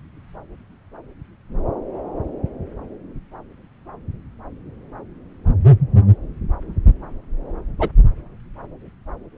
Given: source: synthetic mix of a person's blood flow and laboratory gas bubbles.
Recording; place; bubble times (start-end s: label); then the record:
Doppler ultrasound of blood flow; subclavian vein
7.79-7.89 s: bubbles
From the record:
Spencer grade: 1 (occasional bubble signal discernible with the cardiac motion signal, with majority of cardiac periods free of bubbles); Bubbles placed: anywhere in the cardiac cycle